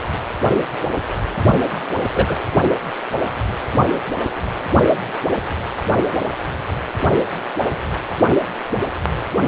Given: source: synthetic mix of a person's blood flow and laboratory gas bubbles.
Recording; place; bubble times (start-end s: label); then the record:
Doppler ultrasound of blood flow; precordium
2.15-2.35 s: bubbles
From the record:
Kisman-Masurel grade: 113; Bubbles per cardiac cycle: 1 to 2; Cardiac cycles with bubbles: 1 to 10%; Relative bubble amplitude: loud (0.450 to 0.775); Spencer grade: 1 (occasional bubble signal discernible with the cardiac motion signal, with majority of cardiac periods free of bubbles); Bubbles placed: only in the low amplitude regions of the cardiac cycle